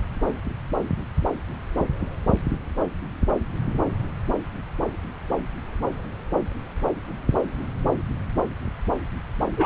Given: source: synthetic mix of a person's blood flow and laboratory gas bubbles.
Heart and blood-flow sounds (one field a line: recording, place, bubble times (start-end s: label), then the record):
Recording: Doppler ultrasound of blood flow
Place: subclavian vein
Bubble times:
9.57-9.66 s: bubbles
From the record:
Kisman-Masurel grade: 112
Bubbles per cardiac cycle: 1 to 2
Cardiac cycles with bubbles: 1 to 10%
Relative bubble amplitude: moderate (0.250 to 0.450)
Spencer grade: 1 (occasional bubble signal discernible with the cardiac motion signal, with majority of cardiac periods free of bubbles)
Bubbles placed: anywhere in the cardiac cycle